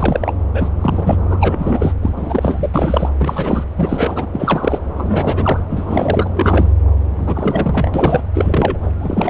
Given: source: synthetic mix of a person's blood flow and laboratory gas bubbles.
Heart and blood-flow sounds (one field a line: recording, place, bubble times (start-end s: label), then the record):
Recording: Doppler ultrasound of blood flow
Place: subclavian vein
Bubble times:
0.00-0.34 s: bubbles
0.53-0.69 s: bubbles
0.80-1.18 s: bubbles
1.29-1.94 s: bubbles
2.02-2.13 s: bubbles
2.17-2.69 s: bubbles
2.73-3.09 s: bubbles
3.19-3.64 s: bubbles
3.76-4.26 s: bubbles
4.33-4.79 s: bubbles
4.96-5.60 s: bubbles
5.69-6.28 s: bubbles
6.34-6.72 s: bubbles
7.17-7.91 s: bubbles
7.94-8.22 s: bubbles
8.34-8.91 s: bubbles
9.01-9.30 s: bubbles
From the record:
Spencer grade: 3 (all of the cardiac periods contain showers or single bubble signals, but not dominating or overriding the cardiac motion signals)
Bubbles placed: anywhere in the cardiac cycle